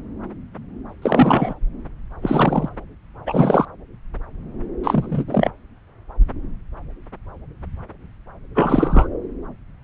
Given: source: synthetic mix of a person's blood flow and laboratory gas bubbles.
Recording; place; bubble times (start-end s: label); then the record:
Doppler ultrasound of blood flow; subclavian vein
1.01-1.53 s: bubbles
2.22-2.69 s: bubbles
3.26-3.65 s: bubbles
4.83-5.51 s: bubbles
8.55-9.08 s: bubbles
From the record:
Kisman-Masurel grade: 223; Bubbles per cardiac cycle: several, 3 to 8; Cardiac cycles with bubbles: 10 to 50%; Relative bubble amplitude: loud (0.450 to 0.775); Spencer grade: 2 (many but less than half of the cardiac periods contain bubble signals, singularly or in groups); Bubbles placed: anywhere in the cardiac cycle